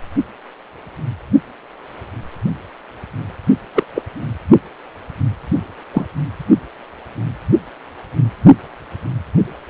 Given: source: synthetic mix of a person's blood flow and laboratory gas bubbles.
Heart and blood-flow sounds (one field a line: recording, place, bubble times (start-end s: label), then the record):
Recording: Doppler ultrasound of blood flow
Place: precordium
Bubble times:
3.75-3.84 s: bubbles
3.94-4.02 s: bubbles
5.93-6.06 s: bubbles
From the record:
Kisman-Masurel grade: 123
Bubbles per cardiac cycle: 1 to 2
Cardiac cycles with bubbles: 10 to 50%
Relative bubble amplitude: loud (0.450 to 0.775)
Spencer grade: 2 (many but less than half of the cardiac periods contain bubble signals, singularly or in groups)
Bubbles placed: anywhere in the cardiac cycle